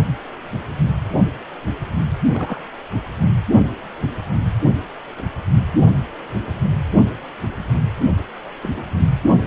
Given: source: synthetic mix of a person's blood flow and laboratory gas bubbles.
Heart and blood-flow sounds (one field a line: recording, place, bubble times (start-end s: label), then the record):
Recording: Doppler ultrasound of blood flow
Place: precordium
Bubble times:
2.31-2.61 s: bubbles
8.62-8.85 s: bubbles
From the record:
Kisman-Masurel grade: 121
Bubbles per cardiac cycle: 1 to 2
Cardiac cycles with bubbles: 10 to 50%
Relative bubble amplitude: barely perceptible (0.100 to 0.250)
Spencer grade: 2 (many but less than half of the cardiac periods contain bubble signals, singularly or in groups)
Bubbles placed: anywhere in the cardiac cycle